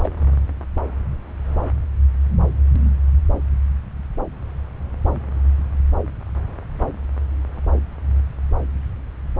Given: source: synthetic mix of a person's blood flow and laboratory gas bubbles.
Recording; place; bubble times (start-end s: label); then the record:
Doppler ultrasound of blood flow; subclavian vein
0.04-0.09 s: bubbles
From the record:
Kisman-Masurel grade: 113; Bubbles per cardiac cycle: 1 to 2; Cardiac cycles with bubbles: 1 to 10%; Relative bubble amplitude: loud (0.450 to 0.775); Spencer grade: 1 (occasional bubble signal discernible with the cardiac motion signal, with majority of cardiac periods free of bubbles); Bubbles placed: anywhere in the cardiac cycle